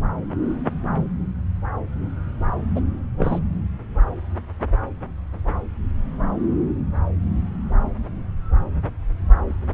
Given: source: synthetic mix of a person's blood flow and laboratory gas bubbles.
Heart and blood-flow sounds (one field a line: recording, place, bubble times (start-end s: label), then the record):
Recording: Doppler ultrasound of blood flow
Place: subclavian vein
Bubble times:
2.75-2.80 s: bubbles
3.17-3.42 s: bubbles
From the record:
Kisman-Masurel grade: 212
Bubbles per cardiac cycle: several, 3 to 8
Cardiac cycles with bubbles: 1 to 10%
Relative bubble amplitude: moderate (0.250 to 0.450)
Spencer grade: 1 (occasional bubble signal discernible with the cardiac motion signal, with majority of cardiac periods free of bubbles)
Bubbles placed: anywhere in the cardiac cycle